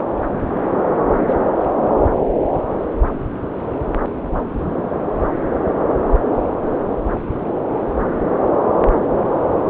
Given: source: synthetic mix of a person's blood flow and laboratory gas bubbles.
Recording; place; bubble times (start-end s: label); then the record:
Doppler ultrasound of blood flow; subclavian vein
1.28-1.35 s: bubbles
From the record:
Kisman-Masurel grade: 113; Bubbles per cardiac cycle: 1 to 2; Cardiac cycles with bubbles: 1 to 10%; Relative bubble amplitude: loud (0.450 to 0.775); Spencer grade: 1 (occasional bubble signal discernible with the cardiac motion signal, with majority of cardiac periods free of bubbles); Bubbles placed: anywhere in the cardiac cycle